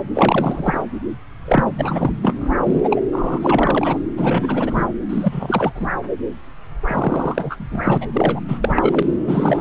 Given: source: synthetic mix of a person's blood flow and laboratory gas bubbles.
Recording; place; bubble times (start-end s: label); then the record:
Doppler ultrasound of blood flow; subclavian vein
0.14-0.84 s: bubbles
1.45-1.64 s: bubbles
1.77-2.49 s: bubbles
2.63-2.80 s: bubbles
2.84-3.01 s: bubbles
3.12-3.97 s: bubbles
4.17-4.86 s: bubbles
5.09-5.72 s: bubbles
5.75-5.91 s: bubbles
6.87-7.98 s: bubbles
8.01-8.06 s: bubbles
8.13-8.41 s: bubbles
8.48-9.03 s: bubbles
9.26-9.61 s: bubbles
From the record:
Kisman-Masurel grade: 343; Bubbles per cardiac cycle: rolling drumbeat, 9 or more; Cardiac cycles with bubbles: 100%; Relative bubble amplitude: loud (0.450 to 0.775); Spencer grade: 3 (all of the cardiac periods contain showers or single bubble signals, but not dominating or overriding the cardiac motion signals); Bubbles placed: anywhere in the cardiac cycle